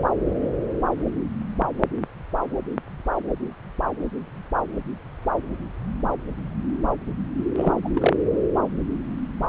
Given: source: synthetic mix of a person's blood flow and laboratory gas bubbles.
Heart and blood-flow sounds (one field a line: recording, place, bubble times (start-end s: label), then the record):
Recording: Doppler ultrasound of blood flow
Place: subclavian vein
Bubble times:
7.57-7.73 s: bubbles
7.84-7.89 s: bubbles
7.95-8.13 s: bubbles
From the record:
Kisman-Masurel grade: 212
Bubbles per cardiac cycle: several, 3 to 8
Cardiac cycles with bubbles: 1 to 10%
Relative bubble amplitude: moderate (0.250 to 0.450)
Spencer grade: 1 (occasional bubble signal discernible with the cardiac motion signal, with majority of cardiac periods free of bubbles)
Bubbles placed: anywhere in the cardiac cycle